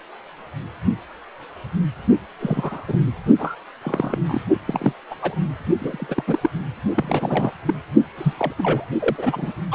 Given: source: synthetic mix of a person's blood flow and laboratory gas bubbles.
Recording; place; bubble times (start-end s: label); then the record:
Doppler ultrasound of blood flow; precordium
2.40-2.85 s: bubbles
2.88-2.98 s: bubbles
3.38-3.56 s: bubbles
3.81-4.18 s: bubbles
4.27-4.42 s: bubbles
4.65-4.93 s: bubbles
5.10-5.15 s: bubbles
5.21-5.39 s: bubbles
5.78-6.24 s: bubbles
6.27-6.38 s: bubbles
6.41-6.50 s: bubbles
6.95-7.51 s: bubbles
7.65-7.75 s: bubbles
8.18-8.33 s: bubbles
8.37-8.54 s: bubbles
8.57-8.86 s: bubbles
8.99-9.52 s: bubbles
9.71-9.74 s: bubbles
From the record:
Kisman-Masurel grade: 232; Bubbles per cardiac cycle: several, 3 to 8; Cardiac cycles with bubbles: 50 to 99%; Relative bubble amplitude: moderate (0.250 to 0.450); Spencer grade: 3 (all of the cardiac periods contain showers or single bubble signals, but not dominating or overriding the cardiac motion signals); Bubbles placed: only in the low amplitude regions of the cardiac cycle